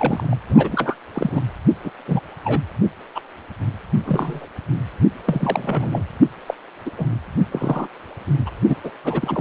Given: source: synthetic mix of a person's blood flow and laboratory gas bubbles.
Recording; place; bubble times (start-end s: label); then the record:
Doppler ultrasound of blood flow; precordium
0.00-0.35 s: bubbles
0.48-0.97 s: bubbles
1.14-1.43 s: bubbles
1.84-1.91 s: bubbles
2.08-2.20 s: bubbles
2.44-2.63 s: bubbles
3.15-3.21 s: bubbles
4.05-4.46 s: bubbles
5.26-6.04 s: bubbles
6.47-6.54 s: bubbles
6.86-6.91 s: bubbles
6.97-7.06 s: bubbles
7.51-7.87 s: bubbles
8.45-8.50 s: bubbles
8.68-8.76 s: bubbles
8.83-8.90 s: bubbles
9.04-9.41 s: bubbles
From the record:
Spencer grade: 3 (all of the cardiac periods contain showers or single bubble signals, but not dominating or overriding the cardiac motion signals); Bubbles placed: only in the low amplitude regions of the cardiac cycle